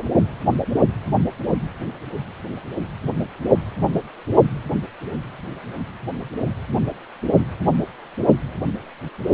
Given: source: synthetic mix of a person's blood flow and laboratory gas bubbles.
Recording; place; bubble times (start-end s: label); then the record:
Doppler ultrasound of blood flow; precordium
no bubbles
From the record:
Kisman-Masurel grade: 000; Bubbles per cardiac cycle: 0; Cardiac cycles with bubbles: 0%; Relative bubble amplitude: no bubbles discernible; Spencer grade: 0 (complete lack of bubble signals)